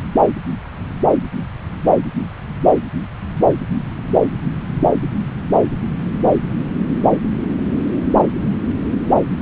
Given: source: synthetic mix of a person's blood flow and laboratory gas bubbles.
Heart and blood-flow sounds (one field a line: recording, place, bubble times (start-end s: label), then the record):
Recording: Doppler ultrasound of blood flow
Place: subclavian vein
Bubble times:
no bubbles
From the record:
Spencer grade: 0 (complete lack of bubble signals)